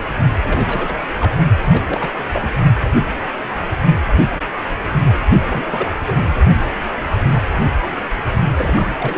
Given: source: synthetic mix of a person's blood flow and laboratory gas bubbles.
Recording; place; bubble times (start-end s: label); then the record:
Doppler ultrasound of blood flow; precordium
0.41-0.96 s: bubbles
1.20-1.33 s: bubbles
1.62-1.83 s: bubbles
1.87-2.11 s: bubbles
2.33-2.52 s: bubbles
5.39-5.86 s: bubbles
6.07-6.35 s: bubbles
8.58-8.91 s: bubbles
8.99-9.18 s: bubbles
From the record:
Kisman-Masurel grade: 221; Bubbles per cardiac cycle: several, 3 to 8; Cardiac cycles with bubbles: 10 to 50%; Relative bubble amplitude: barely perceptible (0.100 to 0.250); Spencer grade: 2 (many but less than half of the cardiac periods contain bubble signals, singularly or in groups); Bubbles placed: only in the low amplitude regions of the cardiac cycle